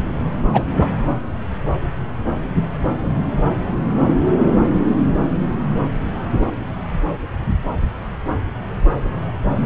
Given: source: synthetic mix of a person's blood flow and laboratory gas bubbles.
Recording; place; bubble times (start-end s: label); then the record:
Doppler ultrasound of blood flow; subclavian vein
0.52-0.66 s: bubbles
0.78-0.89 s: bubbles
From the record:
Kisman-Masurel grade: 213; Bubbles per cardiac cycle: several, 3 to 8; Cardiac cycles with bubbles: 1 to 10%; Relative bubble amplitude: loud (0.450 to 0.775); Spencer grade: 1 (occasional bubble signal discernible with the cardiac motion signal, with majority of cardiac periods free of bubbles); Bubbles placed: anywhere in the cardiac cycle